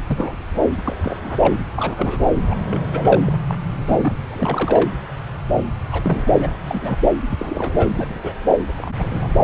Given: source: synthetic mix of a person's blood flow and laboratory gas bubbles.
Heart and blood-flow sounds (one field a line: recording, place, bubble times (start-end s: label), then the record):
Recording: Doppler ultrasound of blood flow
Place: subclavian vein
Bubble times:
0.08-0.43 s: bubbles
0.83-1.54 s: bubbles
1.78-2.20 s: bubbles
2.50-2.58 s: bubbles
2.71-3.22 s: bubbles
3.25-3.33 s: bubbles
3.47-3.55 s: bubbles
3.65-4.15 s: bubbles
4.30-4.90 s: bubbles
5.92-6.31 s: bubbles
6.40-6.49 s: bubbles
6.61-6.98 s: bubbles
7.26-7.37 s: bubbles
7.39-7.88 s: bubbles
7.91-8.33 s: bubbles
8.69-8.73 s: bubbles
8.78-8.93 s: bubbles
8.98-9.27 s: bubbles
From the record:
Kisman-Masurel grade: 232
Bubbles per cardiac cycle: several, 3 to 8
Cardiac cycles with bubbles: 50 to 99%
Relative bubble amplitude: moderate (0.250 to 0.450)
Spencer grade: 3 (all of the cardiac periods contain showers or single bubble signals, but not dominating or overriding the cardiac motion signals)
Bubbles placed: anywhere in the cardiac cycle